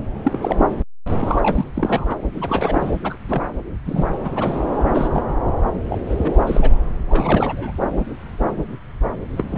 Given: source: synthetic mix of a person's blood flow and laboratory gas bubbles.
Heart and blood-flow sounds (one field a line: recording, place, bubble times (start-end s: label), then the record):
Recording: Doppler ultrasound of blood flow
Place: subclavian vein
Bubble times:
0.24-0.39 s: bubbles
0.42-0.56 s: bubbles
1.21-1.65 s: bubbles
1.74-2.16 s: bubbles
2.33-2.92 s: bubbles
3.04-3.18 s: bubbles
3.28-3.42 s: bubbles
3.86-4.19 s: bubbles
4.24-4.32 s: bubbles
4.36-4.64 s: bubbles
4.92-5.10 s: bubbles
5.12-5.22 s: bubbles
5.85-5.97 s: bubbles
6.09-6.16 s: bubbles
6.24-6.39 s: bubbles
6.46-6.70 s: bubbles
7.07-7.72 s: bubbles
9.37-9.58 s: bubbles
From the record:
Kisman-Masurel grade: 232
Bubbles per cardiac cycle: several, 3 to 8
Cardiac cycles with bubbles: 50 to 99%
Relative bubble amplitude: moderate (0.250 to 0.450)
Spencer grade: 3 (all of the cardiac periods contain showers or single bubble signals, but not dominating or overriding the cardiac motion signals)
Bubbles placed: anywhere in the cardiac cycle